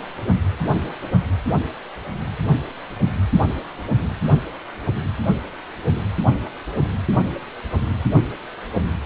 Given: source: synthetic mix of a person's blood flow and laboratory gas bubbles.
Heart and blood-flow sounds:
Doppler ultrasound of blood flow; precordium
no bubbles
From the record:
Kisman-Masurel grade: 000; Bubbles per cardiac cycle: 0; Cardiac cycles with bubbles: 0%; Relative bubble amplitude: no bubbles discernible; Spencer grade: 0 (complete lack of bubble signals)

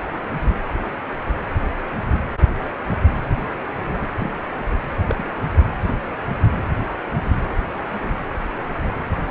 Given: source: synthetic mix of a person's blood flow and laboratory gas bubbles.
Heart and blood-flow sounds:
Doppler ultrasound of blood flow; precordium
4.01-4.06 s: bubbles
4.20-4.29 s: bubbles
5.08-5.25 s: bubbles
From the record:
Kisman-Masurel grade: 121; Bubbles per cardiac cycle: 1 to 2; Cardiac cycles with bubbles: 10 to 50%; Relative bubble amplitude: barely perceptible (0.100 to 0.250); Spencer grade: 2 (many but less than half of the cardiac periods contain bubble signals, singularly or in groups); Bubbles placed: anywhere in the cardiac cycle

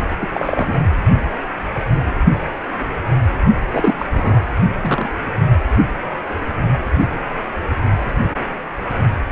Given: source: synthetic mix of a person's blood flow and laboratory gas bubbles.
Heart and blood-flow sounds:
Doppler ultrasound of blood flow; precordium
0.21-0.27 s: bubbles
0.33-0.81 s: bubbles
3.71-3.93 s: bubbles
3.98-4.05 s: bubbles
4.14-4.42 s: bubbles
4.82-5.08 s: bubbles
From the record:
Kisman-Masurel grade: 232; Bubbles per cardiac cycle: several, 3 to 8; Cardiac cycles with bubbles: 50 to 99%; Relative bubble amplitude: moderate (0.250 to 0.450); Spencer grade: 3 (all of the cardiac periods contain showers or single bubble signals, but not dominating or overriding the cardiac motion signals); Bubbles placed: only in the low amplitude regions of the cardiac cycle

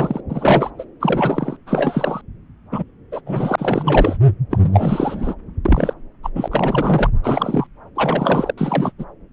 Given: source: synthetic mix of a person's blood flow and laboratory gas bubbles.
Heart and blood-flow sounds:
Doppler ultrasound of blood flow; subclavian vein
0.00-0.21 s: bubbles
0.29-0.70 s: bubbles
0.78-0.84 s: bubbles
1.00-1.56 s: bubbles
1.67-2.21 s: bubbles
2.72-2.83 s: bubbles
3.12-3.21 s: bubbles
3.26-4.17 s: bubbles
4.50-4.58 s: bubbles
4.62-5.35 s: bubbles
5.65-5.94 s: bubbles
6.23-6.30 s: bubbles
6.35-6.48 s: bubbles
6.51-7.10 s: bubbles
7.23-7.67 s: bubbles
7.95-8.53 s: bubbles
8.58-8.92 s: bubbles
8.98-9.05 s: bubbles
From the record:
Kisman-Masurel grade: 333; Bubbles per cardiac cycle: rolling drumbeat, 9 or more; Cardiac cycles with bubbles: 50 to 99%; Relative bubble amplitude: loud (0.450 to 0.775); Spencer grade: 3 (all of the cardiac periods contain showers or single bubble signals, but not dominating or overriding the cardiac motion signals); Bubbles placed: anywhere in the cardiac cycle

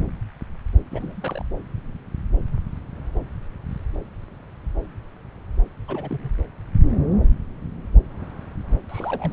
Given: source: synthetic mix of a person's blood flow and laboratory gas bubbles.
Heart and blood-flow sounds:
Doppler ultrasound of blood flow; subclavian vein
0.91-1.43 s: bubbles
5.88-6.29 s: bubbles
8.89-9.33 s: bubbles
From the record:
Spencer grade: 2 (many but less than half of the cardiac periods contain bubble signals, singularly or in groups); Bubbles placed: anywhere in the cardiac cycle

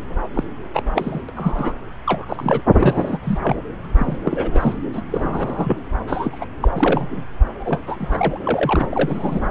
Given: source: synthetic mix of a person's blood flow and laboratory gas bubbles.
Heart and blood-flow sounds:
Doppler ultrasound of blood flow; subclavian vein
0.34-0.43 s: bubbles
0.74-0.83 s: bubbles
0.95-1.22 s: bubbles
1.29-1.31 s: bubbles
1.36-1.74 s: bubbles
2.06-2.25 s: bubbles
2.28-2.61 s: bubbles
2.73-3.18 s: bubbles
3.24-3.38 s: bubbles
3.43-3.55 s: bubbles
3.97-4.18 s: bubbles
4.25-4.77 s: bubbles
4.93-5.01 s: bubbles
5.11-5.82 s: bubbles
6.07-6.45 s: bubbles
6.61-6.71 s: bubbles
6.75-7.25 s: bubbles
7.64-7.79 s: bubbles
7.87-8.39 s: bubbles
8.44-9.40 s: bubbles
From the record:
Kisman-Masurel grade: 242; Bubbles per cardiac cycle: several, 3 to 8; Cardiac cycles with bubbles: 100%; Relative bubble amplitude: moderate (0.250 to 0.450); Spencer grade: 3 (all of the cardiac periods contain showers or single bubble signals, but not dominating or overriding the cardiac motion signals); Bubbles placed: anywhere in the cardiac cycle

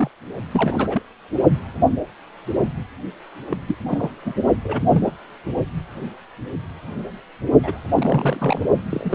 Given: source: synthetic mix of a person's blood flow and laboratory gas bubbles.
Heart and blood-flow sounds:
Doppler ultrasound of blood flow; precordium
0.00-0.11 s: bubbles
0.52-1.02 s: bubbles
3.49-3.57 s: bubbles
3.67-3.76 s: bubbles
3.88-4.10 s: bubbles
4.25-4.33 s: bubbles
4.63-5.11 s: bubbles
7.62-7.79 s: bubbles
7.94-8.62 s: bubbles
8.90-9.15 s: bubbles
From the record:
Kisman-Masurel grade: 232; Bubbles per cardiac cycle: several, 3 to 8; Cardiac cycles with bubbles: 50 to 99%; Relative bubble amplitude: moderate (0.250 to 0.450); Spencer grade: 3 (all of the cardiac periods contain showers or single bubble signals, but not dominating or overriding the cardiac motion signals); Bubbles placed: only in the low amplitude regions of the cardiac cycle

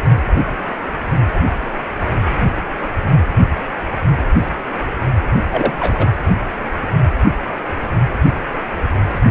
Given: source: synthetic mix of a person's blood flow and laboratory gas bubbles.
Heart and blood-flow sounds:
Doppler ultrasound of blood flow; precordium
5.51-5.72 s: bubbles
5.80-6.09 s: bubbles
From the record:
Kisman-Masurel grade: 223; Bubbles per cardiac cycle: several, 3 to 8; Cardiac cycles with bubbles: 10 to 50%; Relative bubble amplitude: loud (0.450 to 0.775); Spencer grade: 2 (many but less than half of the cardiac periods contain bubble signals, singularly or in groups); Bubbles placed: anywhere in the cardiac cycle

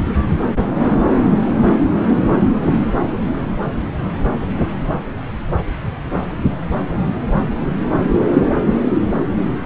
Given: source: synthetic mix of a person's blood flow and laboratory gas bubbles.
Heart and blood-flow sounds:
Doppler ultrasound of blood flow; subclavian vein
no bubbles
From the record:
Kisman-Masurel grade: 000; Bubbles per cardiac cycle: 0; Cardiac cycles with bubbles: 0%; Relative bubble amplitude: no bubbles discernible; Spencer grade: 0 (complete lack of bubble signals)

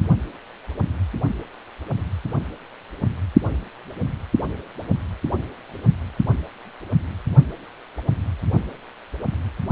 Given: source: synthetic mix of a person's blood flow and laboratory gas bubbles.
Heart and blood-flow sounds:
Doppler ultrasound of blood flow; precordium
no bubbles
From the record:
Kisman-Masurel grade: 000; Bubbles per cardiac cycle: 0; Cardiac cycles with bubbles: 0%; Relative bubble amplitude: no bubbles discernible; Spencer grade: 0 (complete lack of bubble signals)

